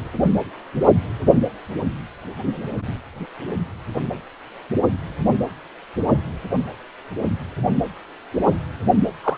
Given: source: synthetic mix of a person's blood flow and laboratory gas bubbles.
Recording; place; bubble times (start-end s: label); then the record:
Doppler ultrasound of blood flow; precordium
9.23-9.37 s: bubbles
From the record:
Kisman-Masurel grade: 112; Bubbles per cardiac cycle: 1 to 2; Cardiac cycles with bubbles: 1 to 10%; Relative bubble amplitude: moderate (0.250 to 0.450); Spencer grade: 1 (occasional bubble signal discernible with the cardiac motion signal, with majority of cardiac periods free of bubbles); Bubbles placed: only in the low amplitude regions of the cardiac cycle